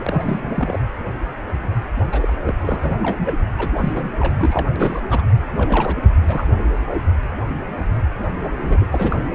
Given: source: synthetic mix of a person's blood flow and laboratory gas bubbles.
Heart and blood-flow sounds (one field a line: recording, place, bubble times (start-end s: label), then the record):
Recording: Doppler ultrasound of blood flow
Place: precordium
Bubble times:
0.00-0.04 s: bubbles
0.06-0.79 s: bubbles
2.12-2.33 s: bubbles
2.44-2.54 s: bubbles
2.62-3.32 s: bubbles
3.58-3.69 s: bubbles
3.76-3.92 s: bubbles
3.96-4.08 s: bubbles
4.19-4.66 s: bubbles
4.75-5.01 s: bubbles
5.09-5.21 s: bubbles
5.55-5.96 s: bubbles
6.27-6.47 s: bubbles
8.61-8.86 s: bubbles
8.92-9.28 s: bubbles
From the record:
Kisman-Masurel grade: 332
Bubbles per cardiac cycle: rolling drumbeat, 9 or more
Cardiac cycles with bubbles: 50 to 99%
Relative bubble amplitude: moderate (0.250 to 0.450)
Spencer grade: 3 (all of the cardiac periods contain showers or single bubble signals, but not dominating or overriding the cardiac motion signals)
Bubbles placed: anywhere in the cardiac cycle